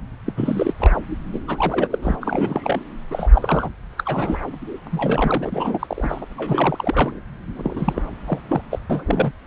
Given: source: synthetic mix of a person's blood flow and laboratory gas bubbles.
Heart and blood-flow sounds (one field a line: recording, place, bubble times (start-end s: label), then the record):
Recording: Doppler ultrasound of blood flow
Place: subclavian vein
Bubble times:
0.27-0.33 s: bubbles
0.36-0.73 s: bubbles
0.80-0.93 s: bubbles
1.33-1.40 s: bubbles
1.47-1.98 s: bubbles
2.02-2.16 s: bubbles
2.21-2.80 s: bubbles
3.10-3.69 s: bubbles
3.98-4.38 s: bubbles
4.91-6.25 s: bubbles
6.37-7.20 s: bubbles
7.55-8.05 s: bubbles
8.25-8.39 s: bubbles
8.48-8.62 s: bubbles
8.71-8.79 s: bubbles
8.89-9.32 s: bubbles
From the record:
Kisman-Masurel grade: 342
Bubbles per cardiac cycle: rolling drumbeat, 9 or more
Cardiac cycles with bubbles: 100%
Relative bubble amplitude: moderate (0.250 to 0.450)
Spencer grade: 3 (all of the cardiac periods contain showers or single bubble signals, but not dominating or overriding the cardiac motion signals)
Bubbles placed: anywhere in the cardiac cycle